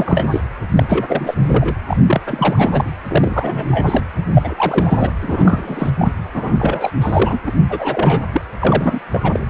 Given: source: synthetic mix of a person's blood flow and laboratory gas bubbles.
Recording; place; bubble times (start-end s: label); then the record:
Doppler ultrasound of blood flow; precordium
0.00-0.28 s: bubbles
0.31-0.41 s: bubbles
0.77-0.85 s: bubbles
0.89-1.34 s: bubbles
1.42-1.75 s: bubbles
1.87-1.97 s: bubbles
2.07-2.21 s: bubbles
2.26-2.90 s: bubbles
3.08-4.04 s: bubbles
4.33-4.54 s: bubbles
4.56-5.12 s: bubbles
5.21-5.90 s: bubbles
5.99-6.12 s: bubbles
6.34-6.92 s: bubbles
7.00-7.38 s: bubbles
7.46-7.51 s: bubbles
7.68-8.25 s: bubbles
8.32-8.42 s: bubbles
8.60-9.00 s: bubbles
9.11-9.40 s: bubbles
From the record:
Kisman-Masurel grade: 343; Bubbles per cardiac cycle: rolling drumbeat, 9 or more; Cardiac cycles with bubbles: 100%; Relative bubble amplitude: loud (0.450 to 0.775); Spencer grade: 3 (all of the cardiac periods contain showers or single bubble signals, but not dominating or overriding the cardiac motion signals); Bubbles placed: anywhere in the cardiac cycle